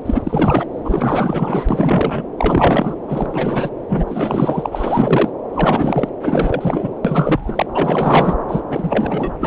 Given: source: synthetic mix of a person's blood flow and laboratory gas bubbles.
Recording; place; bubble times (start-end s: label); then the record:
Doppler ultrasound of blood flow; subclavian vein
0.05-0.66 s: bubbles
0.84-1.65 s: bubbles
1.69-2.23 s: bubbles
2.38-2.96 s: bubbles
3.07-3.69 s: bubbles
3.88-5.30 s: bubbles
5.52-6.09 s: bubbles
6.23-6.92 s: bubbles
7.04-7.67 s: bubbles
7.75-8.37 s: bubbles
8.48-8.61 s: bubbles
8.70-9.32 s: bubbles
9.38-9.47 s: bubbles
From the record:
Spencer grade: 4 (maximum detectable bubble signal sounding continuously throughout systole and diastole of every cardiac period, and overriding the amplitude of the normal cardiac signals); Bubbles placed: anywhere in the cardiac cycle